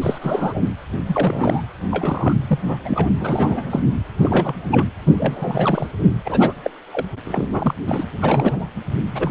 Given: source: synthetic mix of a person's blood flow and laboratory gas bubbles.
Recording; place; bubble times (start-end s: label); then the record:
Doppler ultrasound of blood flow; precordium
0.02-0.62 s: bubbles
1.06-1.66 s: bubbles
1.91-2.33 s: bubbles
2.47-2.79 s: bubbles
2.85-3.10 s: bubbles
3.20-3.79 s: bubbles
4.18-4.65 s: bubbles
4.71-4.86 s: bubbles
5.06-5.13 s: bubbles
5.17-5.87 s: bubbles
6.25-6.53 s: bubbles
6.64-6.71 s: bubbles
6.92-7.06 s: bubbles
7.25-7.48 s: bubbles
7.50-7.75 s: bubbles
7.86-8.05 s: bubbles
8.21-8.67 s: bubbles
9.11-9.31 s: bubbles
From the record:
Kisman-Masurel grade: 342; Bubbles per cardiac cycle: rolling drumbeat, 9 or more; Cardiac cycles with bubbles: 100%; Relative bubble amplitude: moderate (0.250 to 0.450); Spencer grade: 3 (all of the cardiac periods contain showers or single bubble signals, but not dominating or overriding the cardiac motion signals); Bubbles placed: anywhere in the cardiac cycle